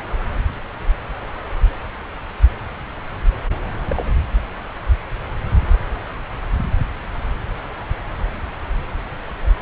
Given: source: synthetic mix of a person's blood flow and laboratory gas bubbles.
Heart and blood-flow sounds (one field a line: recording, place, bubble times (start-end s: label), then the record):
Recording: Doppler ultrasound of blood flow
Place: subclavian vein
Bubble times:
3.89-4.11 s: bubbles
From the record:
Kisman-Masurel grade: 212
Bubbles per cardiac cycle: several, 3 to 8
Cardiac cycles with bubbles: 1 to 10%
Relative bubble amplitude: moderate (0.250 to 0.450)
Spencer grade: 1 (occasional bubble signal discernible with the cardiac motion signal, with majority of cardiac periods free of bubbles)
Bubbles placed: anywhere in the cardiac cycle